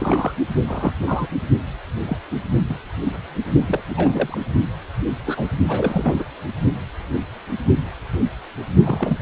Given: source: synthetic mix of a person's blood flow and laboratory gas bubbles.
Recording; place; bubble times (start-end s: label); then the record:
Doppler ultrasound of blood flow; precordium
0.00-0.32 s: bubbles
0.68-0.92 s: bubbles
1.02-1.28 s: bubbles
2.06-2.18 s: bubbles
2.31-2.37 s: bubbles
2.69-2.77 s: bubbles
3.66-3.80 s: bubbles
3.88-4.41 s: bubbles
5.26-5.46 s: bubbles
5.67-6.23 s: bubbles
8.83-9.18 s: bubbles
From the record:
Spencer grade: 3 (all of the cardiac periods contain showers or single bubble signals, but not dominating or overriding the cardiac motion signals); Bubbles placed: only in the low amplitude regions of the cardiac cycle